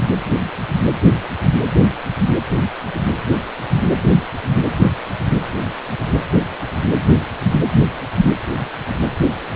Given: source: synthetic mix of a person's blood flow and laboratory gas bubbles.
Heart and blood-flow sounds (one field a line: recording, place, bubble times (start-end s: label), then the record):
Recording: Doppler ultrasound of blood flow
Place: precordium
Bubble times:
no bubbles
From the record:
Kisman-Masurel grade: 000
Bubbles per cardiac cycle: 0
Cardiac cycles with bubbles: 0%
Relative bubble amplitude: no bubbles discernible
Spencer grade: 0 (complete lack of bubble signals)